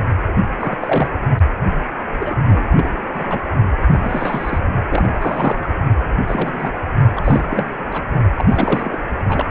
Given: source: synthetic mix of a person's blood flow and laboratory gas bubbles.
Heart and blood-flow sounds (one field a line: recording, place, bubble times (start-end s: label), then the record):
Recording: Doppler ultrasound of blood flow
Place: precordium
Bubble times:
0.59-1.09 s: bubbles
2.19-2.34 s: bubbles
2.45-2.63 s: bubbles
2.77-2.90 s: bubbles
3.12-3.40 s: bubbles
3.88-4.58 s: bubbles
4.89-5.08 s: bubbles
5.12-5.67 s: bubbles
6.27-6.82 s: bubbles
7.16-7.21 s: bubbles
7.23-7.46 s: bubbles
7.50-7.73 s: bubbles
7.90-8.02 s: bubbles
8.37-8.45 s: bubbles
8.48-9.00 s: bubbles
9.28-9.45 s: bubbles
From the record:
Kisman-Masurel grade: 342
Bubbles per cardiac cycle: rolling drumbeat, 9 or more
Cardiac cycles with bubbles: 100%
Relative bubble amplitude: moderate (0.250 to 0.450)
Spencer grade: 3 (all of the cardiac periods contain showers or single bubble signals, but not dominating or overriding the cardiac motion signals)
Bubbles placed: only in the low amplitude regions of the cardiac cycle